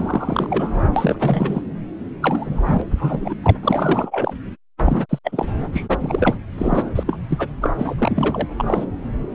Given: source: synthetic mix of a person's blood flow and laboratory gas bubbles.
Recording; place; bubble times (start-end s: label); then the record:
Doppler ultrasound of blood flow; subclavian vein
0.00-0.90 s: bubbles
0.96-1.61 s: bubbles
2.21-2.83 s: bubbles
2.92-3.34 s: bubbles
3.42-3.57 s: bubbles
3.62-4.33 s: bubbles
4.79-5.06 s: bubbles
5.09-5.19 s: bubbles
5.25-5.46 s: bubbles
5.73-5.86 s: bubbles
5.89-5.98 s: bubbles
6.00-6.38 s: bubbles
6.58-6.90 s: bubbles
6.95-7.04 s: bubbles
7.07-7.17 s: bubbles
7.29-7.49 s: bubbles
7.62-7.95 s: bubbles
7.97-8.48 s: bubbles
8.57-8.85 s: bubbles
From the record:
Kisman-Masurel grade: 333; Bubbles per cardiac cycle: rolling drumbeat, 9 or more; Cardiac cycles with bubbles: 50 to 99%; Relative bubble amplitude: loud (0.450 to 0.775); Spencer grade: 3 (all of the cardiac periods contain showers or single bubble signals, but not dominating or overriding the cardiac motion signals); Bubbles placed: anywhere in the cardiac cycle